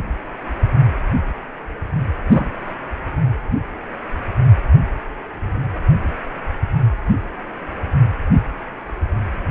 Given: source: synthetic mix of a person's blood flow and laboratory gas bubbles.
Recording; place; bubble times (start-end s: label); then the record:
Doppler ultrasound of blood flow; precordium
2.28-2.48 s: bubbles
From the record:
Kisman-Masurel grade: 212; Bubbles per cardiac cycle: several, 3 to 8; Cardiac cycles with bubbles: 1 to 10%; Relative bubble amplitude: moderate (0.250 to 0.450); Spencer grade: 1 (occasional bubble signal discernible with the cardiac motion signal, with majority of cardiac periods free of bubbles); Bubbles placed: anywhere in the cardiac cycle